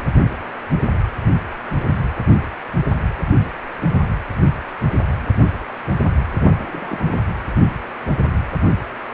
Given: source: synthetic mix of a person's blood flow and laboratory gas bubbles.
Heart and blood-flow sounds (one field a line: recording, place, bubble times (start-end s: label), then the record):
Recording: Doppler ultrasound of blood flow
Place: precordium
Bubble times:
6.40-7.18 s: bubbles
From the record:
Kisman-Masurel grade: 211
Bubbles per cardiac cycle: several, 3 to 8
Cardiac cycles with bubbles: 1 to 10%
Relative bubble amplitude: barely perceptible (0.100 to 0.250)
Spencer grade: 1 (occasional bubble signal discernible with the cardiac motion signal, with majority of cardiac periods free of bubbles)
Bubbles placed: anywhere in the cardiac cycle